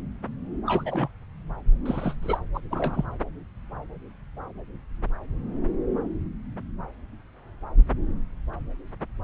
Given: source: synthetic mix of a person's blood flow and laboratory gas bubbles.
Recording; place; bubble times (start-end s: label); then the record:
Doppler ultrasound of blood flow; subclavian vein
0.66-1.09 s: bubbles
1.85-2.15 s: bubbles
2.23-2.40 s: bubbles
2.54-2.60 s: bubbles
2.71-3.06 s: bubbles
From the record:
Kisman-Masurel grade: 222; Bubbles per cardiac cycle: several, 3 to 8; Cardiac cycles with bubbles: 10 to 50%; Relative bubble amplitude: moderate (0.250 to 0.450); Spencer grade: 2 (many but less than half of the cardiac periods contain bubble signals, singularly or in groups); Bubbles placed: anywhere in the cardiac cycle